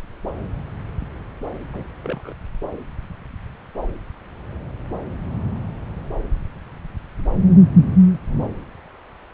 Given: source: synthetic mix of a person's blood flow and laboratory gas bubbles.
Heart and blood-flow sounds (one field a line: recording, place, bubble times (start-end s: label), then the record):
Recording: Doppler ultrasound of blood flow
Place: subclavian vein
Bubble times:
1.73-1.83 s: bubbles
2.02-2.34 s: bubbles
From the record:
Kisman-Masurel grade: 121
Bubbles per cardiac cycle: 1 to 2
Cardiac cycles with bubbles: 10 to 50%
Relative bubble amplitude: barely perceptible (0.100 to 0.250)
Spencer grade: 2 (many but less than half of the cardiac periods contain bubble signals, singularly or in groups)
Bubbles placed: anywhere in the cardiac cycle